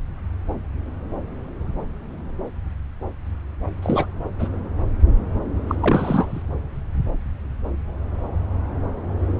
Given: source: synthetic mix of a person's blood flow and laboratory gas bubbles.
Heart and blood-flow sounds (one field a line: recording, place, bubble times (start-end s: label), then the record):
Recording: Doppler ultrasound of blood flow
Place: subclavian vein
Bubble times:
3.82-4.06 s: bubbles
4.39-4.49 s: bubbles
5.69-5.75 s: bubbles
5.80-6.42 s: bubbles
From the record:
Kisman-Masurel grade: 222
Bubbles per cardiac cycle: several, 3 to 8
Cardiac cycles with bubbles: 10 to 50%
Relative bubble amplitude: moderate (0.250 to 0.450)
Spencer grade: 2 (many but less than half of the cardiac periods contain bubble signals, singularly or in groups)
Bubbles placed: anywhere in the cardiac cycle